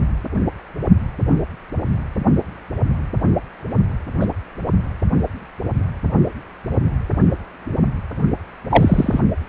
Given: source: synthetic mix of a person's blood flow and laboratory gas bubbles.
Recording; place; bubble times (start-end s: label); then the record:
Doppler ultrasound of blood flow; precordium
4.21-4.26 s: bubbles
8.70-9.21 s: bubbles
From the record:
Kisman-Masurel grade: 123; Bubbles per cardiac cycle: 1 to 2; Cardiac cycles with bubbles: 10 to 50%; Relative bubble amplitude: loud (0.450 to 0.775); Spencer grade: 2 (many but less than half of the cardiac periods contain bubble signals, singularly or in groups); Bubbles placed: only in the low amplitude regions of the cardiac cycle